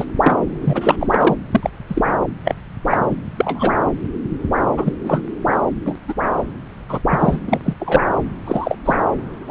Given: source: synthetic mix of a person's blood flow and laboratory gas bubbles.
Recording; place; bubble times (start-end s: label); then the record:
Doppler ultrasound of blood flow; subclavian vein
0.00-0.05 s: bubbles
0.22-0.36 s: bubbles
0.60-0.96 s: bubbles
1.00-1.35 s: bubbles
1.51-1.70 s: bubbles
1.87-2.02 s: bubbles
2.44-2.56 s: bubbles
2.90-2.98 s: bubbles
3.08-3.16 s: bubbles
3.36-3.72 s: bubbles
4.77-4.93 s: bubbles
5.04-5.22 s: bubbles
5.51-5.58 s: bubbles
5.86-5.95 s: bubbles
6.08-6.14 s: bubbles
6.89-6.99 s: bubbles
7.10-7.40 s: bubbles
7.46-7.61 s: bubbles
7.65-7.74 s: bubbles
7.80-8.01 s: bubbles
8.46-8.78 s: bubbles
8.84-8.95 s: bubbles
9.46-9.50 s: bubbles
From the record:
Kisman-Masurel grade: 243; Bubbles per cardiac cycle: several, 3 to 8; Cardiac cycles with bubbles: 100%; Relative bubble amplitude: loud (0.450 to 0.775); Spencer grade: 3 (all of the cardiac periods contain showers or single bubble signals, but not dominating or overriding the cardiac motion signals); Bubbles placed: anywhere in the cardiac cycle